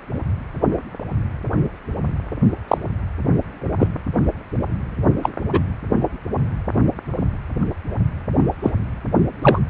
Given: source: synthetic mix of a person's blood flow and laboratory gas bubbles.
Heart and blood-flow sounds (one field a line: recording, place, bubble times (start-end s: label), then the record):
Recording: Doppler ultrasound of blood flow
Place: precordium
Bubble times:
2.68-2.78 s: bubbles
3.78-3.88 s: bubbles
5.23-5.29 s: bubbles
5.52-5.59 s: bubbles
8.62-8.71 s: bubbles
9.42-9.59 s: bubbles
From the record:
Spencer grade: 2 (many but less than half of the cardiac periods contain bubble signals, singularly or in groups)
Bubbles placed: anywhere in the cardiac cycle